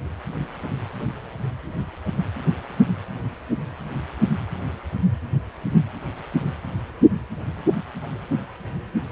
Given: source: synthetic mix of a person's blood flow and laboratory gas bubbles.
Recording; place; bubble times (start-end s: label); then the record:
Doppler ultrasound of blood flow; precordium
no bubbles
From the record:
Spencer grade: 0 (complete lack of bubble signals)